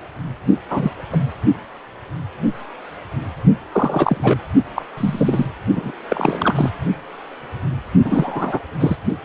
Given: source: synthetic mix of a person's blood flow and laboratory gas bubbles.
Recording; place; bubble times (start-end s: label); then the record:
Doppler ultrasound of blood flow; precordium
0.70-0.91 s: bubbles
1.13-1.20 s: bubbles
3.72-4.37 s: bubbles
4.75-4.86 s: bubbles
4.97-5.46 s: bubbles
5.75-5.92 s: bubbles
6.08-6.70 s: bubbles
8.04-8.59 s: bubbles
8.79-8.96 s: bubbles
From the record:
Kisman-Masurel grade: 233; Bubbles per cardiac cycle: several, 3 to 8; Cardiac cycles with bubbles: 50 to 99%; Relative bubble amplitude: loud (0.450 to 0.775); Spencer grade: 3 (all of the cardiac periods contain showers or single bubble signals, but not dominating or overriding the cardiac motion signals); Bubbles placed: only in the low amplitude regions of the cardiac cycle